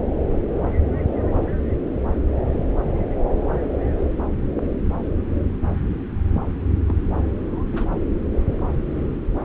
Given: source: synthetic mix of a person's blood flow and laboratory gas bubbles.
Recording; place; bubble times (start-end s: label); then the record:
Doppler ultrasound of blood flow; subclavian vein
1.31-1.59 s: bubbles
3.98-4.06 s: bubbles
6.88-6.94 s: bubbles
7.72-7.87 s: bubbles
From the record:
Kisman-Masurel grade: 121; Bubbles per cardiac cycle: 1 to 2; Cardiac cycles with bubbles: 10 to 50%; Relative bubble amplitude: barely perceptible (0.100 to 0.250); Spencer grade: 2 (many but less than half of the cardiac periods contain bubble signals, singularly or in groups); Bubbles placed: anywhere in the cardiac cycle